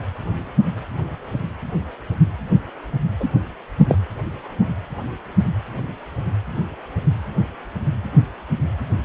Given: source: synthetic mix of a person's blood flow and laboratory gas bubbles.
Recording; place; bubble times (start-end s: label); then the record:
Doppler ultrasound of blood flow; precordium
3.20-3.28 s: bubbles
3.88-3.97 s: bubbles
From the record:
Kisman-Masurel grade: 113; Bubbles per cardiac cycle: 1 to 2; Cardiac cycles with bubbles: 1 to 10%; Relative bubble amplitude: loud (0.450 to 0.775); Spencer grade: 1 (occasional bubble signal discernible with the cardiac motion signal, with majority of cardiac periods free of bubbles); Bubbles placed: anywhere in the cardiac cycle